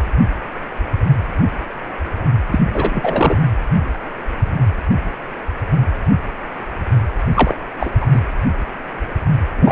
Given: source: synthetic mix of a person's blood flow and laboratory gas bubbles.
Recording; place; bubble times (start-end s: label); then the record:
Doppler ultrasound of blood flow; precordium
2.51-2.59 s: bubbles
2.74-3.37 s: bubbles
7.35-7.58 s: bubbles
7.79-7.90 s: bubbles
8.01-8.06 s: bubbles
8.12-8.20 s: bubbles
9.57-9.72 s: bubbles
From the record:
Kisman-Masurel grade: 233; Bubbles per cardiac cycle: several, 3 to 8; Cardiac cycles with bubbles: 50 to 99%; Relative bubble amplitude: loud (0.450 to 0.775); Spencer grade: 3 (all of the cardiac periods contain showers or single bubble signals, but not dominating or overriding the cardiac motion signals); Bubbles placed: anywhere in the cardiac cycle